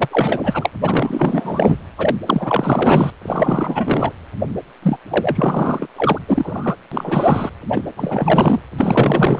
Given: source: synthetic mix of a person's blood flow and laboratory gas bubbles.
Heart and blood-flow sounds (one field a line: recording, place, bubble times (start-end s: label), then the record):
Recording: Doppler ultrasound of blood flow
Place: precordium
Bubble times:
0.00-0.08 s: bubbles
0.11-0.70 s: bubbles
0.82-1.77 s: bubbles
1.98-2.15 s: bubbles
2.26-3.10 s: bubbles
3.22-4.12 s: bubbles
4.82-4.97 s: bubbles
5.10-5.88 s: bubbles
5.96-6.19 s: bubbles
6.27-6.76 s: bubbles
6.91-7.49 s: bubbles
7.69-7.81 s: bubbles
7.96-8.60 s: bubbles
8.78-9.40 s: bubbles
From the record:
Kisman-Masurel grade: 444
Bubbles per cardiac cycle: continuous sound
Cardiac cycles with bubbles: 100%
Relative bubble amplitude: maximal (0.775 to 0.999)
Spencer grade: 4 (maximum detectable bubble signal sounding continuously throughout systole and diastole of every cardiac period, and overriding the amplitude of the normal cardiac signals)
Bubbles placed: anywhere in the cardiac cycle